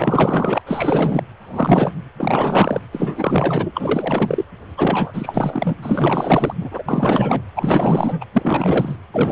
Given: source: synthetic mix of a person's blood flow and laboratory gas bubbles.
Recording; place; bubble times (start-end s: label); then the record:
Doppler ultrasound of blood flow; precordium
0.00-0.61 s: bubbles
0.66-1.23 s: bubbles
1.41-1.92 s: bubbles
2.17-2.82 s: bubbles
2.92-4.45 s: bubbles
4.77-5.76 s: bubbles
5.82-6.54 s: bubbles
6.60-6.82 s: bubbles
6.88-7.41 s: bubbles
7.55-8.24 s: bubbles
8.32-8.96 s: bubbles
9.13-9.32 s: bubbles
From the record:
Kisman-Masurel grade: 444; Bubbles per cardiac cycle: continuous sound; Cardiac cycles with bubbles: 100%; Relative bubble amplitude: maximal (0.775 to 0.999); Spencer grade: 4 (maximum detectable bubble signal sounding continuously throughout systole and diastole of every cardiac period, and overriding the amplitude of the normal cardiac signals); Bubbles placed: anywhere in the cardiac cycle